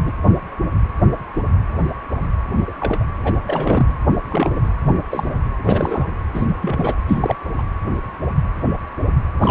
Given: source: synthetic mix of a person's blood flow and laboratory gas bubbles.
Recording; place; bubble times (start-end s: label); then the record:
Doppler ultrasound of blood flow; precordium
0.04-0.11 s: bubbles
2.56-2.62 s: bubbles
2.68-2.72 s: bubbles
2.80-3.04 s: bubbles
3.24-3.33 s: bubbles
3.47-3.86 s: bubbles
4.30-4.50 s: bubbles
4.54-4.63 s: bubbles
4.83-4.96 s: bubbles
5.10-5.29 s: bubbles
5.63-6.08 s: bubbles
6.33-6.95 s: bubbles
7.08-7.35 s: bubbles
7.58-7.62 s: bubbles
9.41-9.51 s: bubbles
From the record:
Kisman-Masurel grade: 232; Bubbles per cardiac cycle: several, 3 to 8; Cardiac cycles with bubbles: 50 to 99%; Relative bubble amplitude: moderate (0.250 to 0.450); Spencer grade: 3 (all of the cardiac periods contain showers or single bubble signals, but not dominating or overriding the cardiac motion signals); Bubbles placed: anywhere in the cardiac cycle